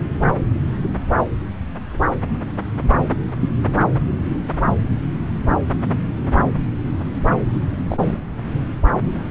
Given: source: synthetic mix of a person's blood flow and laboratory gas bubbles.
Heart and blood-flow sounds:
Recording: Doppler ultrasound of blood flow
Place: subclavian vein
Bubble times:
3.40-3.49 s: bubbles
7.89-8.18 s: bubbles
From the record:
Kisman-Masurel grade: 122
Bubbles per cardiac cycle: 1 to 2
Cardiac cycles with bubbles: 10 to 50%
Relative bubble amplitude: moderate (0.250 to 0.450)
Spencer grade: 2 (many but less than half of the cardiac periods contain bubble signals, singularly or in groups)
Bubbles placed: anywhere in the cardiac cycle

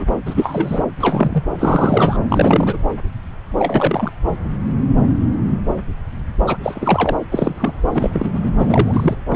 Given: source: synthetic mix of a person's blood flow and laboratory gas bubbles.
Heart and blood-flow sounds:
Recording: Doppler ultrasound of blood flow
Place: subclavian vein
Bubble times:
0.00-0.05 s: bubbles
0.26-0.83 s: bubbles
1.00-1.44 s: bubbles
1.58-2.17 s: bubbles
2.29-2.77 s: bubbles
3.58-4.11 s: bubbles
6.46-6.57 s: bubbles
6.63-7.16 s: bubbles
7.31-7.73 s: bubbles
7.93-8.10 s: bubbles
8.12-8.31 s: bubbles
8.33-8.40 s: bubbles
8.42-8.51 s: bubbles
8.58-9.15 s: bubbles
9.29-9.36 s: bubbles
From the record:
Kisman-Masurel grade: 233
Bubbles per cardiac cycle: several, 3 to 8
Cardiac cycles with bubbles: 50 to 99%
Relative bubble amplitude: loud (0.450 to 0.775)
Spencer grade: 3 (all of the cardiac periods contain showers or single bubble signals, but not dominating or overriding the cardiac motion signals)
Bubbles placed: anywhere in the cardiac cycle

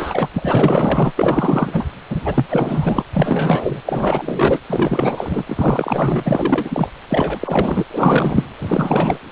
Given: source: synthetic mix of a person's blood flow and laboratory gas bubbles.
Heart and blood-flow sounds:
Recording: Doppler ultrasound of blood flow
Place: precordium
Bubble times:
0.00-0.28 s: bubbles
0.34-1.12 s: bubbles
1.18-1.90 s: bubbles
2.09-2.46 s: bubbles
2.50-3.02 s: bubbles
3.13-3.82 s: bubbles
3.85-4.59 s: bubbles
4.67-5.43 s: bubbles
5.47-6.89 s: bubbles
7.08-7.85 s: bubbles
7.91-8.45 s: bubbles
8.59-9.19 s: bubbles
From the record:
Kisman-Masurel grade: 444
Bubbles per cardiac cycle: continuous sound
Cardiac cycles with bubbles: 100%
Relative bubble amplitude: maximal (0.775 to 0.999)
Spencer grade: 4 (maximum detectable bubble signal sounding continuously throughout systole and diastole of every cardiac period, and overriding the amplitude of the normal cardiac signals)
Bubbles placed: anywhere in the cardiac cycle

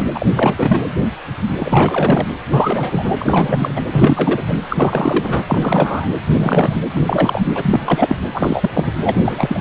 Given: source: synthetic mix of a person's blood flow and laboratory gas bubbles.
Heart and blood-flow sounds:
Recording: Doppler ultrasound of blood flow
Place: precordium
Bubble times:
0.00-0.07 s: bubbles
0.14-0.27 s: bubbles
0.35-0.82 s: bubbles
1.59-2.27 s: bubbles
2.51-3.81 s: bubbles
3.91-4.42 s: bubbles
4.47-4.58 s: bubbles
4.69-5.42 s: bubbles
5.47-6.15 s: bubbles
6.26-6.80 s: bubbles
6.95-7.02 s: bubbles
7.05-7.42 s: bubbles
7.54-7.80 s: bubbles
7.84-8.17 s: bubbles
8.34-8.70 s: bubbles
8.73-8.92 s: bubbles
9.04-9.61 s: bubbles
From the record:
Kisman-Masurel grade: 333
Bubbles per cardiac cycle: rolling drumbeat, 9 or more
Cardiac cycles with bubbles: 50 to 99%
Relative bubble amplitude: loud (0.450 to 0.775)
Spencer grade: 3 (all of the cardiac periods contain showers or single bubble signals, but not dominating or overriding the cardiac motion signals)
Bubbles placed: anywhere in the cardiac cycle

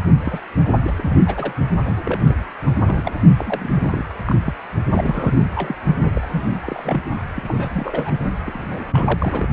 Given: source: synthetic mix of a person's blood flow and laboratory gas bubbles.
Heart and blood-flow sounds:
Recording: Doppler ultrasound of blood flow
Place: precordium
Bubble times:
0.24-0.40 s: bubbles
0.76-0.93 s: bubbles
0.96-1.18 s: bubbles
1.26-1.53 s: bubbles
1.80-2.35 s: bubbles
2.66-2.71 s: bubbles
2.78-3.14 s: bubbles
3.37-3.72 s: bubbles
3.74-4.05 s: bubbles
4.09-4.14 s: bubbles
4.25-4.35 s: bubbles
4.46-4.54 s: bubbles
4.92-5.38 s: bubbles
5.55-5.75 s: bubbles
6.00-6.10 s: bubbles
6.14-6.54 s: bubbles
6.62-7.00 s: bubbles
7.34-8.11 s: bubbles
8.46-9.48 s: bubbles
From the record:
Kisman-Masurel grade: 342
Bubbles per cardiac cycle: rolling drumbeat, 9 or more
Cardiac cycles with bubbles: 100%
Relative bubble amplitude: moderate (0.250 to 0.450)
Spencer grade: 3 (all of the cardiac periods contain showers or single bubble signals, but not dominating or overriding the cardiac motion signals)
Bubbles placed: only in the low amplitude regions of the cardiac cycle

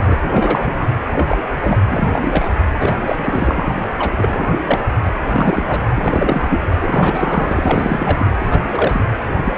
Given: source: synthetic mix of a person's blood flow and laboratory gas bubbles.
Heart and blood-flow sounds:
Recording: Doppler ultrasound of blood flow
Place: precordium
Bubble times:
0.00-0.86 s: bubbles
1.05-1.38 s: bubbles
1.61-1.80 s: bubbles
1.91-2.50 s: bubbles
2.80-2.97 s: bubbles
3.05-3.72 s: bubbles
3.99-4.62 s: bubbles
4.65-4.83 s: bubbles
5.04-5.11 s: bubbles
5.32-5.85 s: bubbles
5.95-6.60 s: bubbles
6.81-8.32 s: bubbles
8.38-8.61 s: bubbles
8.71-9.04 s: bubbles
9.44-9.57 s: bubbles
From the record:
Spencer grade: 3 (all of the cardiac periods contain showers or single bubble signals, but not dominating or overriding the cardiac motion signals)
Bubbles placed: anywhere in the cardiac cycle

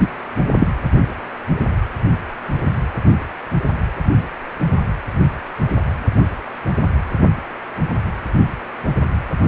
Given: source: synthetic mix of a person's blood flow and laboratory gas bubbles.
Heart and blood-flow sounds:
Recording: Doppler ultrasound of blood flow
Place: precordium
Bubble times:
0.00-0.08 s: bubbles
0.59-0.67 s: bubbles
From the record:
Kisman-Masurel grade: 113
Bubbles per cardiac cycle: 1 to 2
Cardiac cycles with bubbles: 1 to 10%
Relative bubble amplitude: loud (0.450 to 0.775)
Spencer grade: 1 (occasional bubble signal discernible with the cardiac motion signal, with majority of cardiac periods free of bubbles)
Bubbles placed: anywhere in the cardiac cycle

